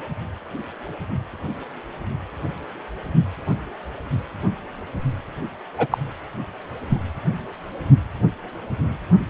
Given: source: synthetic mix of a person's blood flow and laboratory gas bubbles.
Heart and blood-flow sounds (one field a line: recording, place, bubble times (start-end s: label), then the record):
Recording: Doppler ultrasound of blood flow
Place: precordium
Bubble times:
5.78-5.87 s: bubbles
5.92-5.98 s: bubbles
6.89-6.98 s: bubbles
From the record:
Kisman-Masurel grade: 123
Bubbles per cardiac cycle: 1 to 2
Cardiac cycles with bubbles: 10 to 50%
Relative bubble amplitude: loud (0.450 to 0.775)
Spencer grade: 2 (many but less than half of the cardiac periods contain bubble signals, singularly or in groups)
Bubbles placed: anywhere in the cardiac cycle